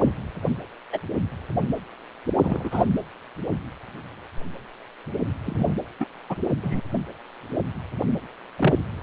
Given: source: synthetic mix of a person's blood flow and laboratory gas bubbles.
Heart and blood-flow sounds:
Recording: Doppler ultrasound of blood flow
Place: precordium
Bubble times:
0.02-0.11 s: bubbles
0.93-0.99 s: bubbles
2.43-2.84 s: bubbles
5.46-5.73 s: bubbles
6.00-6.05 s: bubbles
6.29-6.35 s: bubbles
6.63-6.81 s: bubbles
8.58-8.74 s: bubbles
From the record:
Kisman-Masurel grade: 122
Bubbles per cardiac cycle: 1 to 2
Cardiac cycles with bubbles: 10 to 50%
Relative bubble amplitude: moderate (0.250 to 0.450)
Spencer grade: 2 (many but less than half of the cardiac periods contain bubble signals, singularly or in groups)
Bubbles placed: anywhere in the cardiac cycle

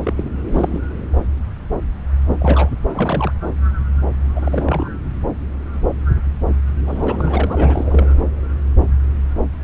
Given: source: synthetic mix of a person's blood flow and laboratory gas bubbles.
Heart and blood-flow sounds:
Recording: Doppler ultrasound of blood flow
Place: subclavian vein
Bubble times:
0.04-0.14 s: bubbles
0.16-0.30 s: bubbles
0.52-0.79 s: bubbles
2.30-2.34 s: bubbles
2.41-2.70 s: bubbles
2.88-3.32 s: bubbles
4.35-4.88 s: bubbles
6.87-8.07 s: bubbles
From the record:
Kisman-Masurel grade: 332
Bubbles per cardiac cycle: rolling drumbeat, 9 or more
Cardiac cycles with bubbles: 50 to 99%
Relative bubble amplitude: moderate (0.250 to 0.450)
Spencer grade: 3 (all of the cardiac periods contain showers or single bubble signals, but not dominating or overriding the cardiac motion signals)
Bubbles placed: anywhere in the cardiac cycle

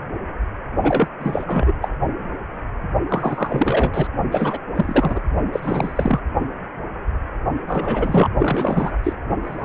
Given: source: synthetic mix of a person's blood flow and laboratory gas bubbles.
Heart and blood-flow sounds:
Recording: Doppler ultrasound of blood flow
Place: precordium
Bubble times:
0.82-1.08 s: bubbles
1.19-1.74 s: bubbles
1.81-1.89 s: bubbles
3.08-4.08 s: bubbles
4.32-4.58 s: bubbles
4.76-5.20 s: bubbles
5.52-6.21 s: bubbles
7.68-8.30 s: bubbles
8.39-8.92 s: bubbles
9.03-9.13 s: bubbles
9.42-9.65 s: bubbles
From the record:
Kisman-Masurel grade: 333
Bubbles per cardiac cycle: rolling drumbeat, 9 or more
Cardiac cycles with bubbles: 50 to 99%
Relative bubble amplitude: loud (0.450 to 0.775)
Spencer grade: 3 (all of the cardiac periods contain showers or single bubble signals, but not dominating or overriding the cardiac motion signals)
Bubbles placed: only in the low amplitude regions of the cardiac cycle

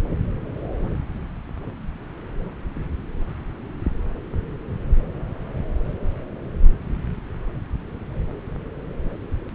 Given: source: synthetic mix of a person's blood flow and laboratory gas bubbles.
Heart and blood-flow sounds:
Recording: Doppler ultrasound of blood flow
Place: subclavian vein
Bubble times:
no bubbles
From the record:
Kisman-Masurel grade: 000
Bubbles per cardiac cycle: 0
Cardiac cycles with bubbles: 0%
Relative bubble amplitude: no bubbles discernible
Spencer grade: 0 (complete lack of bubble signals)

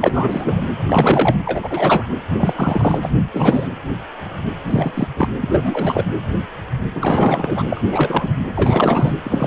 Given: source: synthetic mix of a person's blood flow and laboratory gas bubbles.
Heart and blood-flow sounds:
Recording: Doppler ultrasound of blood flow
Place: precordium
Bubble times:
0.01-0.64 s: bubbles
0.86-1.36 s: bubbles
1.45-2.03 s: bubbles
2.31-3.11 s: bubbles
3.33-3.67 s: bubbles
4.65-5.08 s: bubbles
5.17-5.29 s: bubbles
5.40-6.04 s: bubbles
6.95-7.63 s: bubbles
7.69-7.81 s: bubbles
7.91-8.29 s: bubbles
8.55-9.12 s: bubbles
9.23-9.47 s: bubbles
From the record:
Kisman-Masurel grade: 333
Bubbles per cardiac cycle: rolling drumbeat, 9 or more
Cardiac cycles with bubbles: 50 to 99%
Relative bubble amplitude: loud (0.450 to 0.775)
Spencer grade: 3 (all of the cardiac periods contain showers or single bubble signals, but not dominating or overriding the cardiac motion signals)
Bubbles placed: anywhere in the cardiac cycle

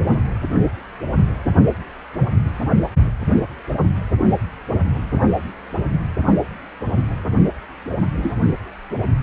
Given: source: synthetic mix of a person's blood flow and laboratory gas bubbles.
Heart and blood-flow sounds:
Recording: Doppler ultrasound of blood flow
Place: precordium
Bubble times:
7.90-7.95 s: bubbles
8.17-8.37 s: bubbles
From the record:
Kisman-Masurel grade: 222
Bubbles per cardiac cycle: several, 3 to 8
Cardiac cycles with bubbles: 10 to 50%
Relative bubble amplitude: moderate (0.250 to 0.450)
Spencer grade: 2 (many but less than half of the cardiac periods contain bubble signals, singularly or in groups)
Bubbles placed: only in the low amplitude regions of the cardiac cycle

